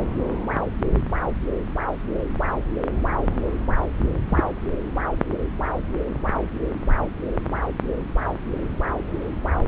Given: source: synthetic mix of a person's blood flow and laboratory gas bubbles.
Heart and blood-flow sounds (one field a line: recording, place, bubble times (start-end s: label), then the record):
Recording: Doppler ultrasound of blood flow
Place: subclavian vein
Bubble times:
4.29-4.43 s: bubbles
From the record:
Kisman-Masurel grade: 113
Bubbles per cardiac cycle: 1 to 2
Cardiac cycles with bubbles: 1 to 10%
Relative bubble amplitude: loud (0.450 to 0.775)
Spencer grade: 1 (occasional bubble signal discernible with the cardiac motion signal, with majority of cardiac periods free of bubbles)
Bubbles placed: anywhere in the cardiac cycle